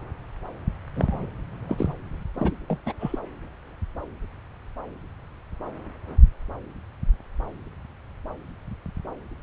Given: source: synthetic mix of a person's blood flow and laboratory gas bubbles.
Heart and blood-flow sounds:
Doppler ultrasound of blood flow; subclavian vein
0.95-1.28 s: bubbles
1.68-1.94 s: bubbles
2.34-2.56 s: bubbles
2.68-2.78 s: bubbles
2.85-2.93 s: bubbles
3.00-3.19 s: bubbles
From the record:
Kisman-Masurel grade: 221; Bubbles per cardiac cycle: several, 3 to 8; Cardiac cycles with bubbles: 10 to 50%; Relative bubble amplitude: barely perceptible (0.100 to 0.250); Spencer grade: 2 (many but less than half of the cardiac periods contain bubble signals, singularly or in groups); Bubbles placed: anywhere in the cardiac cycle

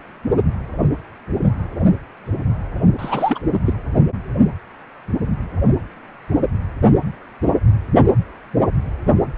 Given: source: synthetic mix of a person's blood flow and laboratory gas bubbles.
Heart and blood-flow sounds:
Doppler ultrasound of blood flow; precordium
2.98-3.39 s: bubbles
3.52-3.60 s: bubbles
3.66-3.73 s: bubbles
From the record:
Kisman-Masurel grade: 212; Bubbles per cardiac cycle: several, 3 to 8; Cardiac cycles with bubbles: 1 to 10%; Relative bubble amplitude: moderate (0.250 to 0.450); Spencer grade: 1 (occasional bubble signal discernible with the cardiac motion signal, with majority of cardiac periods free of bubbles); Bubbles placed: only in the low amplitude regions of the cardiac cycle

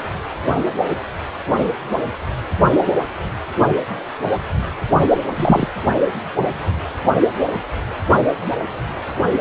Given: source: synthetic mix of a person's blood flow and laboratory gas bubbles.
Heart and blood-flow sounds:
Doppler ultrasound of blood flow; precordium
5.10-5.18 s: bubbles
5.36-5.68 s: bubbles
From the record:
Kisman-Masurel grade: 113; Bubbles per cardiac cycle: 1 to 2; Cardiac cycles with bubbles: 1 to 10%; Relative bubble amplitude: loud (0.450 to 0.775); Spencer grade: 1 (occasional bubble signal discernible with the cardiac motion signal, with majority of cardiac periods free of bubbles); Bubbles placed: only in the low amplitude regions of the cardiac cycle

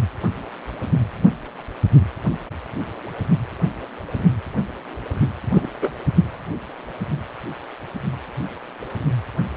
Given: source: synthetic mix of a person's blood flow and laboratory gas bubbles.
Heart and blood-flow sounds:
Doppler ultrasound of blood flow; precordium
5.54-5.67 s: bubbles
5.81-5.91 s: bubbles
From the record:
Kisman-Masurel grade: 113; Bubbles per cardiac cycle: 1 to 2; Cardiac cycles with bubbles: 1 to 10%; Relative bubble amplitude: loud (0.450 to 0.775); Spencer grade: 1 (occasional bubble signal discernible with the cardiac motion signal, with majority of cardiac periods free of bubbles); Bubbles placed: anywhere in the cardiac cycle

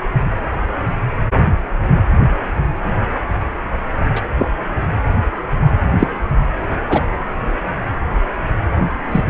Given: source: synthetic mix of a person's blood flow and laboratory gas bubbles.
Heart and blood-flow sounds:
Doppler ultrasound of blood flow; precordium
4.16-4.21 s: bubbles
4.37-4.49 s: bubbles
5.99-6.08 s: bubbles
6.89-7.01 s: bubbles
9.11-9.24 s: bubbles
From the record:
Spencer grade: 2 (many but less than half of the cardiac periods contain bubble signals, singularly or in groups); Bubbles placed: anywhere in the cardiac cycle

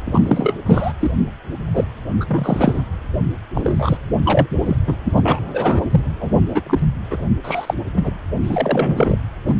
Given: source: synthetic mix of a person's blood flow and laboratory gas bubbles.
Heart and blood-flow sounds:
Doppler ultrasound of blood flow; precordium
0.06-0.56 s: bubbles
0.66-0.93 s: bubbles
1.00-1.11 s: bubbles
1.74-1.85 s: bubbles
2.20-2.25 s: bubbles
2.27-2.83 s: bubbles
3.54-3.97 s: bubbles
4.24-4.47 s: bubbles
4.65-4.76 s: bubbles
4.86-4.96 s: bubbles
5.04-5.12 s: bubbles
5.15-5.40 s: bubbles
5.53-5.83 s: bubbles
5.90-6.01 s: bubbles
6.20-6.31 s: bubbles
6.47-6.62 s: bubbles
6.66-6.79 s: bubbles
7.11-7.20 s: bubbles
7.44-7.74 s: bubbles
7.94-8.11 s: bubbles
8.43-9.16 s: bubbles
9.46-9.54 s: bubbles
From the record:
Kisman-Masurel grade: 243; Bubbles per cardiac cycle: several, 3 to 8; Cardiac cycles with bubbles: 100%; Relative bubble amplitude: loud (0.450 to 0.775); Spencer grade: 3 (all of the cardiac periods contain showers or single bubble signals, but not dominating or overriding the cardiac motion signals); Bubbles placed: anywhere in the cardiac cycle

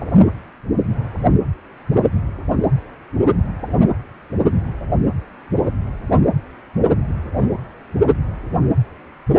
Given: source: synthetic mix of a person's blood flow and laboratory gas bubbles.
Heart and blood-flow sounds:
Doppler ultrasound of blood flow; precordium
0.00-0.26 s: bubbles
From the record:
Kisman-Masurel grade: 211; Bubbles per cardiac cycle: several, 3 to 8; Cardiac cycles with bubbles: 1 to 10%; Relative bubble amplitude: barely perceptible (0.100 to 0.250); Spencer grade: 1 (occasional bubble signal discernible with the cardiac motion signal, with majority of cardiac periods free of bubbles); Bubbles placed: anywhere in the cardiac cycle

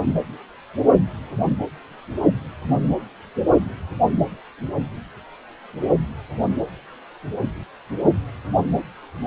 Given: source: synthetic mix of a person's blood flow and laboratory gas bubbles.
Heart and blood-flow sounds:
Doppler ultrasound of blood flow; precordium
no bubbles
From the record:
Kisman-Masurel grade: 000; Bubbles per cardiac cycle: 0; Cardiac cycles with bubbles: 0%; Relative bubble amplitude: no bubbles discernible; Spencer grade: 0 (complete lack of bubble signals)

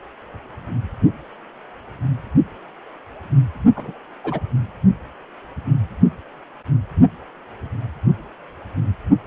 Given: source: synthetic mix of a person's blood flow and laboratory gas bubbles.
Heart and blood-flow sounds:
Doppler ultrasound of blood flow; precordium
3.75-3.92 s: bubbles
4.24-4.40 s: bubbles
From the record:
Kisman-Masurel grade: 121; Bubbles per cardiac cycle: 1 to 2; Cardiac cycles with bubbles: 10 to 50%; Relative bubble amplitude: barely perceptible (0.100 to 0.250); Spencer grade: 2 (many but less than half of the cardiac periods contain bubble signals, singularly or in groups); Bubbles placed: only in the low amplitude regions of the cardiac cycle

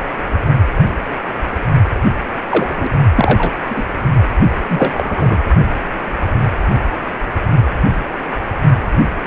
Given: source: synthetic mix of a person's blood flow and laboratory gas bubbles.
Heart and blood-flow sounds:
Doppler ultrasound of blood flow; precordium
2.50-2.89 s: bubbles
3.16-3.58 s: bubbles
3.69-3.84 s: bubbles
4.68-5.39 s: bubbles
From the record:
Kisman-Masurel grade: 223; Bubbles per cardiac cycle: several, 3 to 8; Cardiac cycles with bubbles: 10 to 50%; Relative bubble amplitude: loud (0.450 to 0.775); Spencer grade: 2 (many but less than half of the cardiac periods contain bubble signals, singularly or in groups); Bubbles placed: only in the low amplitude regions of the cardiac cycle

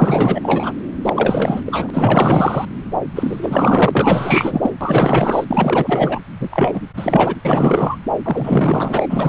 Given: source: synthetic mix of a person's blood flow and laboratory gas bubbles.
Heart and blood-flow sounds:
Doppler ultrasound of blood flow; subclavian vein
0.00-0.73 s: bubbles
1.04-1.61 s: bubbles
1.66-1.91 s: bubbles
1.93-2.65 s: bubbles
3.15-4.70 s: bubbles
4.80-5.45 s: bubbles
5.47-6.19 s: bubbles
6.39-6.82 s: bubbles
6.96-7.35 s: bubbles
7.45-7.96 s: bubbles
8.22-9.29 s: bubbles
From the record:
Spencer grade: 4 (maximum detectable bubble signal sounding continuously throughout systole and diastole of every cardiac period, and overriding the amplitude of the normal cardiac signals); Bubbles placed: anywhere in the cardiac cycle

